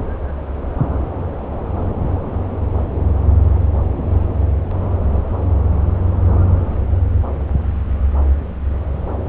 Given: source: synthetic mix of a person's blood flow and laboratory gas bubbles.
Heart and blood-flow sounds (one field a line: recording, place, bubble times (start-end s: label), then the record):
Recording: Doppler ultrasound of blood flow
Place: subclavian vein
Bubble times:
no bubbles
From the record:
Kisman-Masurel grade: 000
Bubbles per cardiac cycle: 0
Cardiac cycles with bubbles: 0%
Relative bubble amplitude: no bubbles discernible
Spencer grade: 0 (complete lack of bubble signals)